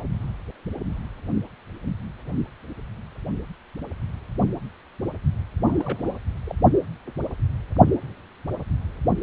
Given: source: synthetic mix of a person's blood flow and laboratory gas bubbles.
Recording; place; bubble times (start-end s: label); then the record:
Doppler ultrasound of blood flow; precordium
5.67-6.17 s: bubbles
6.46-6.55 s: bubbles
From the record:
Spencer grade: 2 (many but less than half of the cardiac periods contain bubble signals, singularly or in groups); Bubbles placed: only in the low amplitude regions of the cardiac cycle